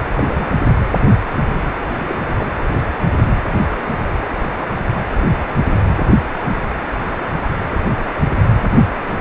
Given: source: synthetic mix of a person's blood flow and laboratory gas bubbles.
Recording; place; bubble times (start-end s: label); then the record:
Doppler ultrasound of blood flow; precordium
0.16-0.46 s: bubbles
1.91-2.18 s: bubbles
2.38-2.53 s: bubbles
From the record:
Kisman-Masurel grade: 222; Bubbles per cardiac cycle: several, 3 to 8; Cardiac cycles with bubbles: 10 to 50%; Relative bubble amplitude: moderate (0.250 to 0.450); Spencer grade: 2 (many but less than half of the cardiac periods contain bubble signals, singularly or in groups); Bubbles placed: anywhere in the cardiac cycle